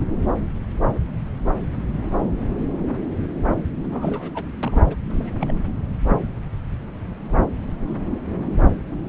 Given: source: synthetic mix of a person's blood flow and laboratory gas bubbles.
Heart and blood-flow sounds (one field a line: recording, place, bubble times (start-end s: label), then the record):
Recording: Doppler ultrasound of blood flow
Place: subclavian vein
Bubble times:
3.79-4.32 s: bubbles
4.34-4.46 s: bubbles
4.62-4.96 s: bubbles
5.09-5.57 s: bubbles
From the record:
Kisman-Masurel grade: 221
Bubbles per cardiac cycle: several, 3 to 8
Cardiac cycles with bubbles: 10 to 50%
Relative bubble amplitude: barely perceptible (0.100 to 0.250)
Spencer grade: 2 (many but less than half of the cardiac periods contain bubble signals, singularly or in groups)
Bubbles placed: anywhere in the cardiac cycle